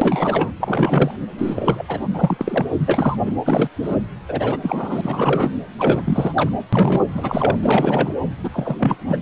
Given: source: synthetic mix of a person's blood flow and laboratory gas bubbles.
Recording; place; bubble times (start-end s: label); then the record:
Doppler ultrasound of blood flow; precordium
0.01-0.51 s: bubbles
0.60-1.11 s: bubbles
1.38-1.83 s: bubbles
1.88-2.00 s: bubbles
2.13-2.67 s: bubbles
2.81-3.17 s: bubbles
3.25-3.35 s: bubbles
3.46-3.69 s: bubbles
3.83-3.95 s: bubbles
4.29-4.58 s: bubbles
4.62-5.50 s: bubbles
5.78-6.49 s: bubbles
6.72-7.02 s: bubbles
7.13-7.60 s: bubbles
7.62-8.14 s: bubbles
8.44-8.49 s: bubbles
8.52-9.17 s: bubbles
From the record:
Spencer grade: 3 (all of the cardiac periods contain showers or single bubble signals, but not dominating or overriding the cardiac motion signals); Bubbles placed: anywhere in the cardiac cycle